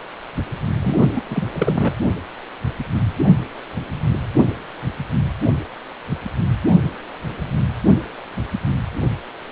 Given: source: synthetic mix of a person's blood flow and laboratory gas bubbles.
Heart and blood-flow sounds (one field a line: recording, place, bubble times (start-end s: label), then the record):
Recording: Doppler ultrasound of blood flow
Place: precordium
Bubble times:
0.82-1.04 s: bubbles
1.15-1.22 s: bubbles
1.30-1.44 s: bubbles
1.52-1.94 s: bubbles
From the record:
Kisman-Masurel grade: 212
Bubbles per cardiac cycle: several, 3 to 8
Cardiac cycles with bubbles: 1 to 10%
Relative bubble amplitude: moderate (0.250 to 0.450)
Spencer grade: 1 (occasional bubble signal discernible with the cardiac motion signal, with majority of cardiac periods free of bubbles)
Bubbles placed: anywhere in the cardiac cycle